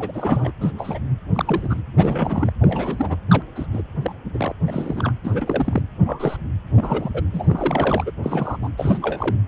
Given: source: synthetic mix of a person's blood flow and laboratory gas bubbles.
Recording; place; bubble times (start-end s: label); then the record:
Doppler ultrasound of blood flow; precordium
0.00-0.51 s: bubbles
0.60-0.71 s: bubbles
0.77-0.98 s: bubbles
1.32-1.81 s: bubbles
1.97-2.52 s: bubbles
2.59-3.17 s: bubbles
3.29-3.42 s: bubbles
3.56-3.67 s: bubbles
3.73-3.81 s: bubbles
4.02-4.15 s: bubbles
4.34-4.55 s: bubbles
4.67-5.12 s: bubbles
5.24-5.82 s: bubbles
6.05-6.37 s: bubbles
6.75-7.10 s: bubbles
7.14-7.22 s: bubbles
7.33-8.11 s: bubbles
8.23-8.57 s: bubbles
8.62-8.71 s: bubbles
8.77-9.37 s: bubbles
From the record:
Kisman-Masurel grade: 242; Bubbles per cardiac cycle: several, 3 to 8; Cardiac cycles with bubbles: 100%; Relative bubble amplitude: moderate (0.250 to 0.450); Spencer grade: 3 (all of the cardiac periods contain showers or single bubble signals, but not dominating or overriding the cardiac motion signals); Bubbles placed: anywhere in the cardiac cycle